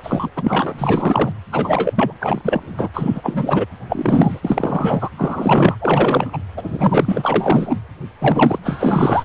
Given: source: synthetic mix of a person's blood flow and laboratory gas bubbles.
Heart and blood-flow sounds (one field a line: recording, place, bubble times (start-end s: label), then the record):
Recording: Doppler ultrasound of blood flow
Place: precordium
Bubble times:
0.03-0.29 s: bubbles
0.36-0.74 s: bubbles
0.78-1.32 s: bubbles
1.51-2.12 s: bubbles
2.20-2.42 s: bubbles
2.45-2.88 s: bubbles
2.93-3.66 s: bubbles
3.88-4.40 s: bubbles
4.44-5.10 s: bubbles
5.17-5.76 s: bubbles
5.80-6.38 s: bubbles
6.57-7.81 s: bubbles
8.21-8.60 s: bubbles
8.63-9.24 s: bubbles
From the record:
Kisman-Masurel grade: 343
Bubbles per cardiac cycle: rolling drumbeat, 9 or more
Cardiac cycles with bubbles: 100%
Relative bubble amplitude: loud (0.450 to 0.775)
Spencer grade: 3 (all of the cardiac periods contain showers or single bubble signals, but not dominating or overriding the cardiac motion signals)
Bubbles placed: anywhere in the cardiac cycle